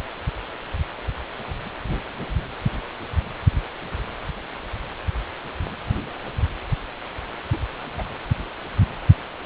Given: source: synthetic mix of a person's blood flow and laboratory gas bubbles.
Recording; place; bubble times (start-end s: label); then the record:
Doppler ultrasound of blood flow; precordium
7.52-7.57 s: bubbles
7.97-8.02 s: bubbles
From the record:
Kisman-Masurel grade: 122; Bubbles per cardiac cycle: 1 to 2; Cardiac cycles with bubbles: 10 to 50%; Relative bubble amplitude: moderate (0.250 to 0.450); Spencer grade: 2 (many but less than half of the cardiac periods contain bubble signals, singularly or in groups); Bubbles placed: anywhere in the cardiac cycle